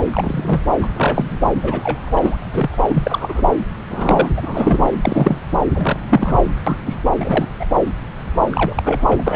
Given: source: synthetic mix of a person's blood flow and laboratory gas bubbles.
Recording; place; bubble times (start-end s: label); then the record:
Doppler ultrasound of blood flow; subclavian vein
0.12-0.61 s: bubbles
0.82-0.88 s: bubbles
0.96-1.35 s: bubbles
1.54-2.37 s: bubbles
2.40-2.76 s: bubbles
2.89-3.43 s: bubbles
3.90-4.27 s: bubbles
4.36-4.93 s: bubbles
5.03-5.42 s: bubbles
5.74-5.99 s: bubbles
6.09-6.35 s: bubbles
6.67-6.76 s: bubbles
6.85-6.98 s: bubbles
7.20-7.46 s: bubbles
7.59-7.65 s: bubbles
8.51-9.22 s: bubbles
9.27-9.36 s: bubbles
From the record:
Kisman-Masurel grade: 233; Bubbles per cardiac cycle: several, 3 to 8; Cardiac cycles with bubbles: 50 to 99%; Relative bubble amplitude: loud (0.450 to 0.775); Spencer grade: 3 (all of the cardiac periods contain showers or single bubble signals, but not dominating or overriding the cardiac motion signals); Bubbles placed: anywhere in the cardiac cycle